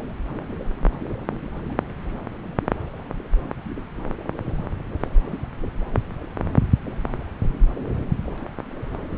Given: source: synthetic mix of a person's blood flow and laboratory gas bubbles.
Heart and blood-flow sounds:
Doppler ultrasound of blood flow; subclavian vein
no bubbles
From the record:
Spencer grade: 0 (complete lack of bubble signals)

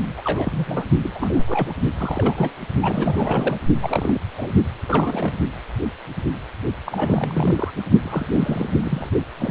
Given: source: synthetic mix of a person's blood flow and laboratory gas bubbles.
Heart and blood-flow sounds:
Doppler ultrasound of blood flow; precordium
0.17-0.22 s: bubbles
0.25-0.86 s: bubbles
1.03-1.72 s: bubbles
1.97-2.52 s: bubbles
2.81-3.61 s: bubbles
3.81-4.21 s: bubbles
4.38-4.52 s: bubbles
4.87-5.38 s: bubbles
6.86-7.71 s: bubbles
8.02-9.10 s: bubbles
9.39-9.50 s: bubbles
From the record:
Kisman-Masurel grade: 332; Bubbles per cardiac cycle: rolling drumbeat, 9 or more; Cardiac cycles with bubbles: 50 to 99%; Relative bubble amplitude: moderate (0.250 to 0.450); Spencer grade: 3 (all of the cardiac periods contain showers or single bubble signals, but not dominating or overriding the cardiac motion signals); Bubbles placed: only in the low amplitude regions of the cardiac cycle

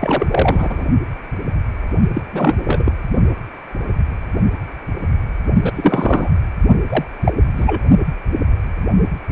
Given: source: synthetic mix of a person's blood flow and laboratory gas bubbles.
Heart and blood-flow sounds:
Doppler ultrasound of blood flow; precordium
0.00-0.26 s: bubbles
0.30-0.85 s: bubbles
2.14-2.23 s: bubbles
2.32-2.62 s: bubbles
2.67-2.92 s: bubbles
5.63-5.71 s: bubbles
5.75-6.29 s: bubbles
6.89-7.05 s: bubbles
7.24-7.33 s: bubbles
7.57-7.80 s: bubbles
From the record:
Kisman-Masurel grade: 223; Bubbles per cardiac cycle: several, 3 to 8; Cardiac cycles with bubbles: 10 to 50%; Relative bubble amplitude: loud (0.450 to 0.775); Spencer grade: 2 (many but less than half of the cardiac periods contain bubble signals, singularly or in groups); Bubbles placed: only in the low amplitude regions of the cardiac cycle

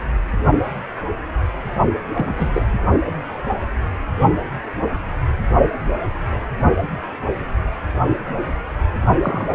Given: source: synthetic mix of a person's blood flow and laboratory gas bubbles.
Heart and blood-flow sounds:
Doppler ultrasound of blood flow; precordium
2.14-2.66 s: bubbles
9.22-9.55 s: bubbles
From the record:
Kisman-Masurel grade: 222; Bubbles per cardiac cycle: several, 3 to 8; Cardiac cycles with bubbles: 10 to 50%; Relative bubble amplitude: moderate (0.250 to 0.450); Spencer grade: 2 (many but less than half of the cardiac periods contain bubble signals, singularly or in groups); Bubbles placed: only in the low amplitude regions of the cardiac cycle

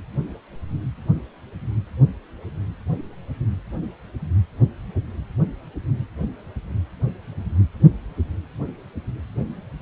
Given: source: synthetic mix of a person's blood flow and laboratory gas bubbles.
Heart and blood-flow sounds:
Doppler ultrasound of blood flow; precordium
no bubbles
From the record:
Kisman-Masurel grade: 000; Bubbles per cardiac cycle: 0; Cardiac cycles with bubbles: 0%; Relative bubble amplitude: no bubbles discernible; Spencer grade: 0 (complete lack of bubble signals)

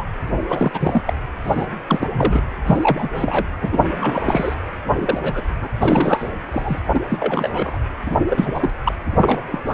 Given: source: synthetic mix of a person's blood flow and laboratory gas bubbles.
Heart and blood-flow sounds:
Doppler ultrasound of blood flow; precordium
0.00-0.04 s: bubbles
0.48-1.01 s: bubbles
1.06-1.14 s: bubbles
1.44-1.67 s: bubbles
1.88-2.07 s: bubbles
2.12-2.47 s: bubbles
2.66-3.46 s: bubbles
3.62-4.55 s: bubbles
4.98-5.19 s: bubbles
5.22-5.42 s: bubbles
5.61-5.70 s: bubbles
5.79-6.29 s: bubbles
6.51-6.79 s: bubbles
6.94-7.00 s: bubbles
7.10-7.78 s: bubbles
8.07-8.17 s: bubbles
8.29-8.70 s: bubbles
8.85-8.94 s: bubbles
9.12-9.59 s: bubbles
9.65-9.74 s: bubbles
From the record:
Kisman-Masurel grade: 342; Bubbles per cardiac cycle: rolling drumbeat, 9 or more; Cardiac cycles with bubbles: 100%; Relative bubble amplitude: moderate (0.250 to 0.450); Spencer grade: 3 (all of the cardiac periods contain showers or single bubble signals, but not dominating or overriding the cardiac motion signals); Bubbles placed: anywhere in the cardiac cycle

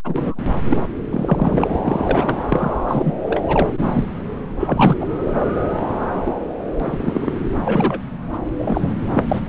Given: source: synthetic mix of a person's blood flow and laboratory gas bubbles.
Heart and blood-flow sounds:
Doppler ultrasound of blood flow; subclavian vein
0.05-0.40 s: bubbles
0.70-0.77 s: bubbles
1.10-1.78 s: bubbles
1.84-2.45 s: bubbles
2.48-2.71 s: bubbles
2.88-3.15 s: bubbles
3.25-3.40 s: bubbles
3.48-3.68 s: bubbles
3.79-4.04 s: bubbles
4.60-4.96 s: bubbles
5.00-5.06 s: bubbles
6.00-6.08 s: bubbles
6.14-6.20 s: bubbles
6.25-6.33 s: bubbles
6.79-7.32 s: bubbles
7.65-8.00 s: bubbles
8.33-8.38 s: bubbles
8.58-8.94 s: bubbles
9.13-9.23 s: bubbles
9.28-9.41 s: bubbles
From the record:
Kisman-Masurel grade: 232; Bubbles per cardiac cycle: several, 3 to 8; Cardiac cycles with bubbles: 50 to 99%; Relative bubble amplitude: moderate (0.250 to 0.450); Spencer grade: 3 (all of the cardiac periods contain showers or single bubble signals, but not dominating or overriding the cardiac motion signals); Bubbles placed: anywhere in the cardiac cycle

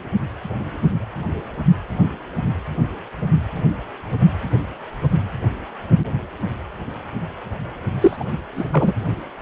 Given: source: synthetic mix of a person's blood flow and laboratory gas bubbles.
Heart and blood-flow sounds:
Doppler ultrasound of blood flow; precordium
8.01-8.17 s: bubbles
8.20-8.23 s: bubbles
8.56-8.64 s: bubbles
8.72-8.94 s: bubbles
From the record:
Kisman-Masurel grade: 223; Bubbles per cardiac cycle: several, 3 to 8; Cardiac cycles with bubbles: 10 to 50%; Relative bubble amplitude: loud (0.450 to 0.775); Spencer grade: 2 (many but less than half of the cardiac periods contain bubble signals, singularly or in groups); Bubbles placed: anywhere in the cardiac cycle

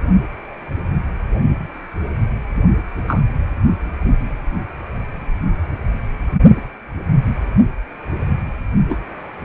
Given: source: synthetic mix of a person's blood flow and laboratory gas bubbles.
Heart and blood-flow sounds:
Doppler ultrasound of blood flow; precordium
3.07-3.23 s: bubbles
8.88-8.97 s: bubbles
From the record:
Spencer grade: 2 (many but less than half of the cardiac periods contain bubble signals, singularly or in groups); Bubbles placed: only in the low amplitude regions of the cardiac cycle

